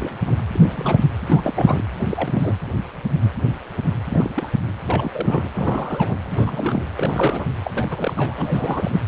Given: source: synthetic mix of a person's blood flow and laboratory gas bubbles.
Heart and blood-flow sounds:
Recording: Doppler ultrasound of blood flow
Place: precordium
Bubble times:
0.00-0.18 s: bubbles
0.27-0.38 s: bubbles
0.53-1.00 s: bubbles
1.26-1.82 s: bubbles
1.99-2.57 s: bubbles
4.08-4.48 s: bubbles
4.87-6.17 s: bubbles
6.24-6.86 s: bubbles
6.96-7.53 s: bubbles
7.64-7.71 s: bubbles
7.74-9.00 s: bubbles
From the record:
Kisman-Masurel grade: 332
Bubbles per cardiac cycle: rolling drumbeat, 9 or more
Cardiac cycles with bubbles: 50 to 99%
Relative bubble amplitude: moderate (0.250 to 0.450)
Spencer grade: 3 (all of the cardiac periods contain showers or single bubble signals, but not dominating or overriding the cardiac motion signals)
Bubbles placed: anywhere in the cardiac cycle

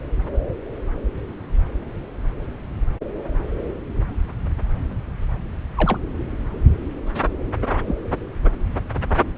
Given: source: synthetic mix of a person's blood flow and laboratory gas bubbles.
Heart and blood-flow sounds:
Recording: Doppler ultrasound of blood flow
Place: subclavian vein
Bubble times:
5.75-5.99 s: bubbles
7.85-7.96 s: bubbles
From the record:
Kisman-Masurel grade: 122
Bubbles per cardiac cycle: 1 to 2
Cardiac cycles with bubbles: 10 to 50%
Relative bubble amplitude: moderate (0.250 to 0.450)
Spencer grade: 2 (many but less than half of the cardiac periods contain bubble signals, singularly or in groups)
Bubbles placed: anywhere in the cardiac cycle

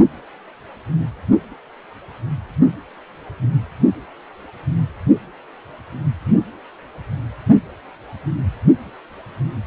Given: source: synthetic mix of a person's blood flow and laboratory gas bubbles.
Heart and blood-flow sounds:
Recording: Doppler ultrasound of blood flow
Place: precordium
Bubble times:
no bubbles
From the record:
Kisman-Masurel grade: 000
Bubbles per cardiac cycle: 0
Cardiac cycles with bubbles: 0%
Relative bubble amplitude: no bubbles discernible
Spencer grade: 0 (complete lack of bubble signals)

